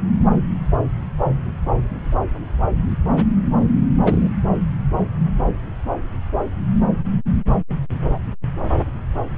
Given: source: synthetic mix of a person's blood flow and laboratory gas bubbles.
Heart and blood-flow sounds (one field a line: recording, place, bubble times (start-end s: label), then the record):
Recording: Doppler ultrasound of blood flow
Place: subclavian vein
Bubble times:
3.98-4.29 s: bubbles
From the record:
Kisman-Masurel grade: 212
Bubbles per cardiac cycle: several, 3 to 8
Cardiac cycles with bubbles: 1 to 10%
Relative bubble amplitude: moderate (0.250 to 0.450)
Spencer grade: 1 (occasional bubble signal discernible with the cardiac motion signal, with majority of cardiac periods free of bubbles)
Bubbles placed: anywhere in the cardiac cycle